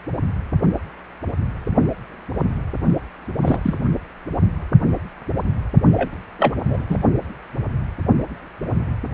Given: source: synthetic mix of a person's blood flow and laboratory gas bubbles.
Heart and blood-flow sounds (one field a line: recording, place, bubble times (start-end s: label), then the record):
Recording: Doppler ultrasound of blood flow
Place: precordium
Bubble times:
3.40-3.81 s: bubbles
5.96-6.09 s: bubbles
6.38-6.54 s: bubbles
6.57-6.85 s: bubbles
6.88-6.97 s: bubbles
From the record:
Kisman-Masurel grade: 222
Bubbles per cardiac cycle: several, 3 to 8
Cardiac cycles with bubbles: 10 to 50%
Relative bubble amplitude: moderate (0.250 to 0.450)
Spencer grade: 2 (many but less than half of the cardiac periods contain bubble signals, singularly or in groups)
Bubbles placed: only in the low amplitude regions of the cardiac cycle